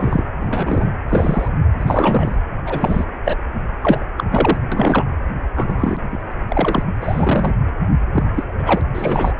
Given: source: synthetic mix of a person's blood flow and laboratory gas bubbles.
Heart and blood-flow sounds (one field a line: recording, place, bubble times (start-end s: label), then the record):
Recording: Doppler ultrasound of blood flow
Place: precordium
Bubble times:
0.00-0.23 s: bubbles
0.40-0.91 s: bubbles
1.08-1.48 s: bubbles
1.77-2.36 s: bubbles
2.67-3.04 s: bubbles
3.25-3.37 s: bubbles
3.82-4.04 s: bubbles
4.17-4.24 s: bubbles
4.32-4.58 s: bubbles
4.72-5.04 s: bubbles
5.55-6.00 s: bubbles
6.11-6.32 s: bubbles
6.49-6.83 s: bubbles
7.01-7.54 s: bubbles
8.13-8.24 s: bubbles
8.34-8.44 s: bubbles
8.58-8.81 s: bubbles
8.95-9.34 s: bubbles
From the record:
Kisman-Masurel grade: 242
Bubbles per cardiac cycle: several, 3 to 8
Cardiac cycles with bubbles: 100%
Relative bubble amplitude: moderate (0.250 to 0.450)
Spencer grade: 3 (all of the cardiac periods contain showers or single bubble signals, but not dominating or overriding the cardiac motion signals)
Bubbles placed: anywhere in the cardiac cycle